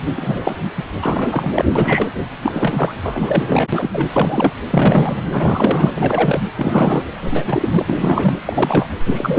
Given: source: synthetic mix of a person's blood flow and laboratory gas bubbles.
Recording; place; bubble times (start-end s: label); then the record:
Doppler ultrasound of blood flow; precordium
0.17-0.60 s: bubbles
0.77-0.85 s: bubbles
1.02-1.65 s: bubbles
1.75-2.08 s: bubbles
2.43-2.95 s: bubbles
3.03-3.67 s: bubbles
3.72-4.08 s: bubbles
4.13-4.53 s: bubbles
4.70-5.26 s: bubbles
5.31-5.90 s: bubbles
5.96-6.40 s: bubbles
6.55-7.05 s: bubbles
7.30-7.83 s: bubbles
7.87-8.35 s: bubbles
8.45-8.89 s: bubbles
9.04-9.39 s: bubbles
From the record:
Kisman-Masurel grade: 343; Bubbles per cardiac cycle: rolling drumbeat, 9 or more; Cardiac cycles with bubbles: 100%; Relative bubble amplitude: loud (0.450 to 0.775); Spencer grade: 3 (all of the cardiac periods contain showers or single bubble signals, but not dominating or overriding the cardiac motion signals); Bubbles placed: anywhere in the cardiac cycle